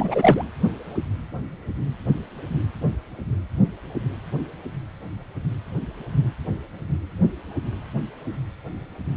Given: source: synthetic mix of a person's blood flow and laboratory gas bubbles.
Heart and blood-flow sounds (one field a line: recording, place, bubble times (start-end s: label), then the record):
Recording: Doppler ultrasound of blood flow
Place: precordium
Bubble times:
0.00-0.43 s: bubbles
From the record:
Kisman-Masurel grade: 213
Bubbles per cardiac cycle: several, 3 to 8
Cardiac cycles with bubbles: 1 to 10%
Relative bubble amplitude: loud (0.450 to 0.775)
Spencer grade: 1 (occasional bubble signal discernible with the cardiac motion signal, with majority of cardiac periods free of bubbles)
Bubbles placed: anywhere in the cardiac cycle